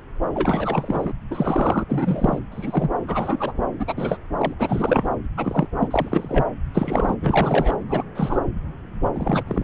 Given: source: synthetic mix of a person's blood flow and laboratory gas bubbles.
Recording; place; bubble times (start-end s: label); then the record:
Doppler ultrasound of blood flow; subclavian vein
0.34-1.12 s: bubbles
1.30-1.83 s: bubbles
1.89-2.39 s: bubbles
2.51-2.90 s: bubbles
3.08-3.52 s: bubbles
3.79-3.94 s: bubbles
3.96-4.17 s: bubbles
4.38-4.54 s: bubbles
4.59-5.08 s: bubbles
5.37-5.67 s: bubbles
5.79-5.88 s: bubbles
5.91-6.46 s: bubbles
6.74-7.16 s: bubbles
7.21-7.75 s: bubbles
7.88-8.02 s: bubbles
8.15-8.39 s: bubbles
9.02-9.09 s: bubbles
9.14-9.43 s: bubbles
9.47-9.64 s: bubbles
From the record:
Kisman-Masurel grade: 242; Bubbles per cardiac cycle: several, 3 to 8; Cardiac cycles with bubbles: 100%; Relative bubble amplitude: moderate (0.250 to 0.450); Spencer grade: 3 (all of the cardiac periods contain showers or single bubble signals, but not dominating or overriding the cardiac motion signals); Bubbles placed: anywhere in the cardiac cycle